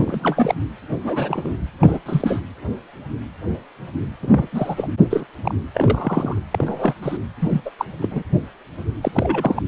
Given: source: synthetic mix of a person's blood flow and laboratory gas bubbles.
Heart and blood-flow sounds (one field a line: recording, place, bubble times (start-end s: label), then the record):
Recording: Doppler ultrasound of blood flow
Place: precordium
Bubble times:
0.00-0.55 s: bubbles
1.03-1.57 s: bubbles
1.80-2.00 s: bubbles
2.06-2.41 s: bubbles
4.21-4.47 s: bubbles
4.52-4.87 s: bubbles
5.09-5.25 s: bubbles
5.43-5.54 s: bubbles
5.74-6.39 s: bubbles
6.51-6.94 s: bubbles
7.02-7.17 s: bubbles
7.40-7.60 s: bubbles
7.65-7.71 s: bubbles
7.78-7.85 s: bubbles
8.02-8.08 s: bubbles
8.11-8.23 s: bubbles
9.01-9.63 s: bubbles
From the record:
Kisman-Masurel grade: 232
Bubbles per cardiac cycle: several, 3 to 8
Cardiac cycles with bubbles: 50 to 99%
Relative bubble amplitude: moderate (0.250 to 0.450)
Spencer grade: 3 (all of the cardiac periods contain showers or single bubble signals, but not dominating or overriding the cardiac motion signals)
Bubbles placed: anywhere in the cardiac cycle